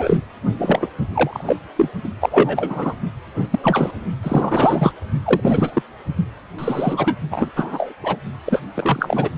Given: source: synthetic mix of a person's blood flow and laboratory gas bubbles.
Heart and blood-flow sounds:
Doppler ultrasound of blood flow; precordium
0.00-0.18 s: bubbles
0.57-0.88 s: bubbles
1.14-1.56 s: bubbles
1.76-1.89 s: bubbles
2.04-2.08 s: bubbles
2.21-2.94 s: bubbles
3.35-3.47 s: bubbles
3.50-3.59 s: bubbles
3.63-3.91 s: bubbles
4.22-4.91 s: bubbles
5.24-5.82 s: bubbles
6.58-7.16 s: bubbles
7.31-7.51 s: bubbles
7.55-7.93 s: bubbles
8.04-8.16 s: bubbles
8.46-8.60 s: bubbles
8.74-9.29 s: bubbles
From the record:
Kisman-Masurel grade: 233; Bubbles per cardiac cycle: several, 3 to 8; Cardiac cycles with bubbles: 50 to 99%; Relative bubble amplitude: loud (0.450 to 0.775); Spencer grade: 3 (all of the cardiac periods contain showers or single bubble signals, but not dominating or overriding the cardiac motion signals); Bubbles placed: only in the low amplitude regions of the cardiac cycle

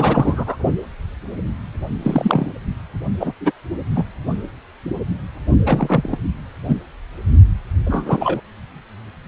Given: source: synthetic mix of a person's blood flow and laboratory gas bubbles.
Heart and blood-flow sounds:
Doppler ultrasound of blood flow; precordium
0.00-0.56 s: bubbles
2.02-2.53 s: bubbles
3.20-3.33 s: bubbles
3.40-3.52 s: bubbles
3.95-4.05 s: bubbles
5.65-6.18 s: bubbles
6.64-6.74 s: bubbles
7.86-8.41 s: bubbles
From the record:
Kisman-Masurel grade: 233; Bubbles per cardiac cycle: several, 3 to 8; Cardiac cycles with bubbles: 50 to 99%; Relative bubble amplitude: loud (0.450 to 0.775); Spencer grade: 3 (all of the cardiac periods contain showers or single bubble signals, but not dominating or overriding the cardiac motion signals); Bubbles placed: only in the low amplitude regions of the cardiac cycle

